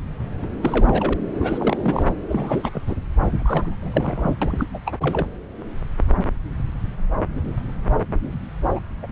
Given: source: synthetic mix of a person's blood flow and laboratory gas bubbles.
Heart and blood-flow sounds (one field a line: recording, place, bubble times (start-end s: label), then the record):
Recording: Doppler ultrasound of blood flow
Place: subclavian vein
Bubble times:
0.19-0.28 s: bubbles
0.42-0.47 s: bubbles
0.61-1.14 s: bubbles
1.34-2.06 s: bubbles
2.29-2.69 s: bubbles
2.75-2.81 s: bubbles
2.87-2.96 s: bubbles
3.40-3.76 s: bubbles
3.80-4.36 s: bubbles
4.42-4.67 s: bubbles
4.74-4.79 s: bubbles
4.85-4.93 s: bubbles
5.01-5.26 s: bubbles
8.75-8.79 s: bubbles
9.02-9.06 s: bubbles
From the record:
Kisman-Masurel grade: 332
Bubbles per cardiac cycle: rolling drumbeat, 9 or more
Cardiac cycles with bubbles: 50 to 99%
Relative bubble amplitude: moderate (0.250 to 0.450)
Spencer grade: 3 (all of the cardiac periods contain showers or single bubble signals, but not dominating or overriding the cardiac motion signals)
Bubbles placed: anywhere in the cardiac cycle